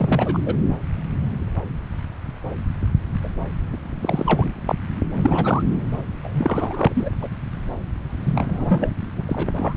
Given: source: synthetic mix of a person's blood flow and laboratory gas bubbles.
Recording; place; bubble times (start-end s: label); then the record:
Doppler ultrasound of blood flow; subclavian vein
0.00-0.54 s: bubbles
3.23-3.29 s: bubbles
3.72-3.77 s: bubbles
4.00-4.59 s: bubbles
4.67-4.75 s: bubbles
5.17-5.63 s: bubbles
6.22-7.09 s: bubbles
7.21-7.28 s: bubbles
8.24-8.96 s: bubbles
9.18-9.22 s: bubbles
9.27-9.53 s: bubbles
9.56-9.73 s: bubbles
From the record:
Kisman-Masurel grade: 332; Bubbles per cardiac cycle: rolling drumbeat, 9 or more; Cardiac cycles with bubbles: 50 to 99%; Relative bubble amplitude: moderate (0.250 to 0.450); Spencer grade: 3 (all of the cardiac periods contain showers or single bubble signals, but not dominating or overriding the cardiac motion signals); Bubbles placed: anywhere in the cardiac cycle